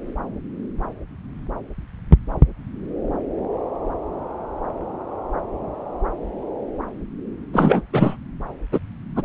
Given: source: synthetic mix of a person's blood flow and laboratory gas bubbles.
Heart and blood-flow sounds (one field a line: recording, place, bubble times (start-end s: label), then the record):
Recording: Doppler ultrasound of blood flow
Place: subclavian vein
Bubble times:
7.53-7.82 s: bubbles
7.92-8.17 s: bubbles
8.72-8.79 s: bubbles
9.16-9.23 s: bubbles
From the record:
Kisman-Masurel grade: 223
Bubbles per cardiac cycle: several, 3 to 8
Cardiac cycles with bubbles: 10 to 50%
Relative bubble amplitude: loud (0.450 to 0.775)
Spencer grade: 2 (many but less than half of the cardiac periods contain bubble signals, singularly or in groups)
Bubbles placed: anywhere in the cardiac cycle